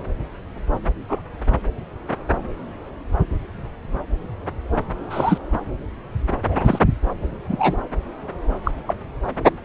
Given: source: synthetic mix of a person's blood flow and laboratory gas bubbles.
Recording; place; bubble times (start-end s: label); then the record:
Doppler ultrasound of blood flow; subclavian vein
1.08-1.21 s: bubbles
5.10-5.38 s: bubbles
6.49-6.79 s: bubbles
7.49-7.77 s: bubbles
8.64-8.71 s: bubbles
8.87-8.95 s: bubbles
From the record:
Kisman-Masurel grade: 122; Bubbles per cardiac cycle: 1 to 2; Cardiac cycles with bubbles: 10 to 50%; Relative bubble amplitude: moderate (0.250 to 0.450); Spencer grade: 2 (many but less than half of the cardiac periods contain bubble signals, singularly or in groups); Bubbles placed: anywhere in the cardiac cycle